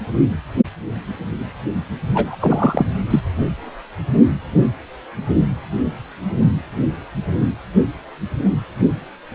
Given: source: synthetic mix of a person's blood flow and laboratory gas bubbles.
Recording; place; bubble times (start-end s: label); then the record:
Doppler ultrasound of blood flow; precordium
2.13-2.35 s: bubbles
2.40-2.85 s: bubbles
3.10-3.21 s: bubbles
From the record:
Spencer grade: 1 (occasional bubble signal discernible with the cardiac motion signal, with majority of cardiac periods free of bubbles); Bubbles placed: anywhere in the cardiac cycle